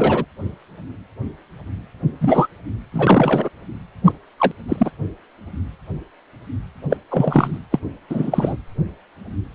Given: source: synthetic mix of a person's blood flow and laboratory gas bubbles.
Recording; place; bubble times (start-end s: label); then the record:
Doppler ultrasound of blood flow; precordium
0.00-0.25 s: bubbles
2.21-2.47 s: bubbles
2.92-3.50 s: bubbles
4.04-4.12 s: bubbles
4.38-4.51 s: bubbles
4.68-4.91 s: bubbles
6.89-6.97 s: bubbles
7.10-7.58 s: bubbles
7.71-7.79 s: bubbles
8.09-8.56 s: bubbles
From the record:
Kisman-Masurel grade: 233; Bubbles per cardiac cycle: several, 3 to 8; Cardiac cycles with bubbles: 50 to 99%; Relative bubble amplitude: loud (0.450 to 0.775); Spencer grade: 3 (all of the cardiac periods contain showers or single bubble signals, but not dominating or overriding the cardiac motion signals); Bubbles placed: anywhere in the cardiac cycle